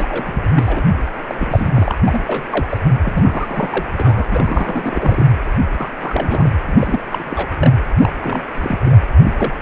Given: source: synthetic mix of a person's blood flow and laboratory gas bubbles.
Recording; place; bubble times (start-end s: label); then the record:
Doppler ultrasound of blood flow; precordium
0.00-0.84 s: bubbles
1.27-1.69 s: bubbles
1.74-1.97 s: bubbles
2.06-2.20 s: bubbles
2.27-2.43 s: bubbles
2.50-2.67 s: bubbles
2.69-2.78 s: bubbles
3.02-4.25 s: bubbles
4.30-5.26 s: bubbles
5.46-5.50 s: bubbles
5.78-5.88 s: bubbles
6.00-6.51 s: bubbles
6.67-7.00 s: bubbles
7.12-7.47 s: bubbles
7.59-7.73 s: bubbles
8.00-8.11 s: bubbles
8.21-8.41 s: bubbles
8.54-8.96 s: bubbles
9.23-9.33 s: bubbles
9.37-9.54 s: bubbles
From the record:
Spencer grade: 3 (all of the cardiac periods contain showers or single bubble signals, but not dominating or overriding the cardiac motion signals); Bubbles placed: anywhere in the cardiac cycle